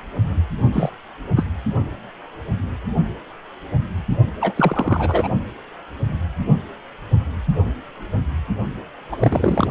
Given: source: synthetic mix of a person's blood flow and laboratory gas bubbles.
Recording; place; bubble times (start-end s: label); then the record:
Doppler ultrasound of blood flow; precordium
0.72-0.90 s: bubbles
1.36-1.44 s: bubbles
4.41-4.54 s: bubbles
4.56-5.28 s: bubbles
9.12-9.16 s: bubbles
9.19-9.69 s: bubbles
From the record:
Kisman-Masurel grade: 222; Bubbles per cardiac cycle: several, 3 to 8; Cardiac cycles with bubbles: 10 to 50%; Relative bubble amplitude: moderate (0.250 to 0.450); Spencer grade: 2 (many but less than half of the cardiac periods contain bubble signals, singularly or in groups); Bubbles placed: only in the low amplitude regions of the cardiac cycle